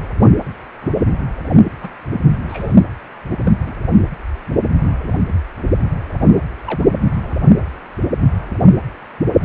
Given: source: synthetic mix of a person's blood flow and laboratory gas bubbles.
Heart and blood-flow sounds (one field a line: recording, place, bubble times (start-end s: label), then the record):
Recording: Doppler ultrasound of blood flow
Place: precordium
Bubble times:
0.82-0.98 s: bubbles
1.82-1.89 s: bubbles
2.48-2.75 s: bubbles
3.45-3.52 s: bubbles
3.59-3.80 s: bubbles
6.65-6.85 s: bubbles
From the record:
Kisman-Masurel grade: 121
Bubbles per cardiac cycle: 1 to 2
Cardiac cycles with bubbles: 10 to 50%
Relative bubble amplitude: barely perceptible (0.100 to 0.250)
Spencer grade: 2 (many but less than half of the cardiac periods contain bubble signals, singularly or in groups)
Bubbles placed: anywhere in the cardiac cycle